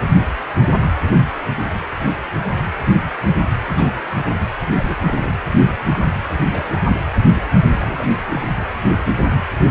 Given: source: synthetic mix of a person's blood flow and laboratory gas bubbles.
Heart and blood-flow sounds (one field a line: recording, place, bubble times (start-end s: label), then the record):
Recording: Doppler ultrasound of blood flow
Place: precordium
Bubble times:
3.67-3.94 s: bubbles
4.08-4.48 s: bubbles
4.64-5.32 s: bubbles
5.59-5.74 s: bubbles
5.89-6.12 s: bubbles
6.49-6.84 s: bubbles
7.35-7.40 s: bubbles
7.76-8.17 s: bubbles
8.21-8.24 s: bubbles
8.28-8.45 s: bubbles
From the record:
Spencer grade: 2 (many but less than half of the cardiac periods contain bubble signals, singularly or in groups)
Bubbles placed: anywhere in the cardiac cycle